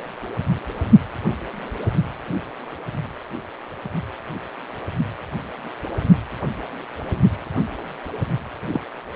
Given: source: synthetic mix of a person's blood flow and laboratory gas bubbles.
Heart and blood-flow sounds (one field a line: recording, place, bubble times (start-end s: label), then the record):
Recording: Doppler ultrasound of blood flow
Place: precordium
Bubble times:
8.71-8.81 s: bubbles
From the record:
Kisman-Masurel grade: 112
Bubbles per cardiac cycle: 1 to 2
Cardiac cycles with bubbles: 1 to 10%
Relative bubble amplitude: moderate (0.250 to 0.450)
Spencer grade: 1 (occasional bubble signal discernible with the cardiac motion signal, with majority of cardiac periods free of bubbles)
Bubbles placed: only in the low amplitude regions of the cardiac cycle